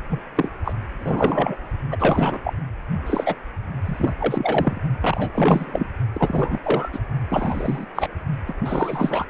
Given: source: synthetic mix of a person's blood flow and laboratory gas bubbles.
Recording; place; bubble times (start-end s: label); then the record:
Doppler ultrasound of blood flow; precordium
0.10-0.22 s: bubbles
0.36-0.49 s: bubbles
0.65-0.73 s: bubbles
0.99-1.57 s: bubbles
1.90-1.97 s: bubbles
2.00-2.40 s: bubbles
2.44-2.54 s: bubbles
3.06-3.34 s: bubbles
3.85-4.13 s: bubbles
4.18-4.79 s: bubbles
5.00-5.32 s: bubbles
5.34-5.87 s: bubbles
6.12-6.59 s: bubbles
6.62-6.89 s: bubbles
6.92-7.00 s: bubbles
7.29-7.86 s: bubbles
7.94-8.09 s: bubbles
8.47-9.27 s: bubbles
From the record:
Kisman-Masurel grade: 343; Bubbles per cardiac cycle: rolling drumbeat, 9 or more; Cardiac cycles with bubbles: 100%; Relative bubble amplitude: loud (0.450 to 0.775); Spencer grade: 3 (all of the cardiac periods contain showers or single bubble signals, but not dominating or overriding the cardiac motion signals); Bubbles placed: only in the low amplitude regions of the cardiac cycle